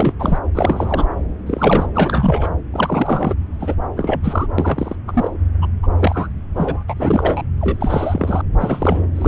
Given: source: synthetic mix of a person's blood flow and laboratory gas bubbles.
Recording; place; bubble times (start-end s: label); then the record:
Doppler ultrasound of blood flow; subclavian vein
0.00-0.13 s: bubbles
0.19-0.38 s: bubbles
0.54-1.06 s: bubbles
1.46-1.87 s: bubbles
1.95-2.48 s: bubbles
2.73-3.35 s: bubbles
3.60-3.75 s: bubbles
3.96-4.46 s: bubbles
4.58-4.96 s: bubbles
5.08-5.31 s: bubbles
5.62-5.67 s: bubbles
5.83-5.88 s: bubbles
5.99-6.29 s: bubbles
6.55-6.84 s: bubbles
6.88-6.93 s: bubbles
6.96-7.42 s: bubbles
7.59-8.42 s: bubbles
8.60-9.08 s: bubbles
9.15-9.28 s: bubbles
From the record:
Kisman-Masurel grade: 343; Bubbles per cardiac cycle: rolling drumbeat, 9 or more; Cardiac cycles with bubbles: 100%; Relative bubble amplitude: loud (0.450 to 0.775); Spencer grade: 3 (all of the cardiac periods contain showers or single bubble signals, but not dominating or overriding the cardiac motion signals); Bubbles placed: anywhere in the cardiac cycle